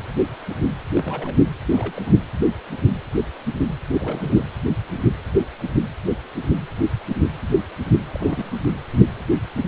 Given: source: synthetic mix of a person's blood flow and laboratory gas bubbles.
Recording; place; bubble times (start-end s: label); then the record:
Doppler ultrasound of blood flow; precordium
0.96-1.35 s: bubbles
1.72-1.93 s: bubbles
1.97-1.99 s: bubbles
2.08-2.14 s: bubbles
3.89-4.44 s: bubbles
8.12-8.60 s: bubbles
8.64-8.76 s: bubbles
From the record:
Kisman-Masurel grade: 221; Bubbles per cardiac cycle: several, 3 to 8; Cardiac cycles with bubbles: 10 to 50%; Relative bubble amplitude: barely perceptible (0.100 to 0.250); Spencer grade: 2 (many but less than half of the cardiac periods contain bubble signals, singularly or in groups); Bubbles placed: anywhere in the cardiac cycle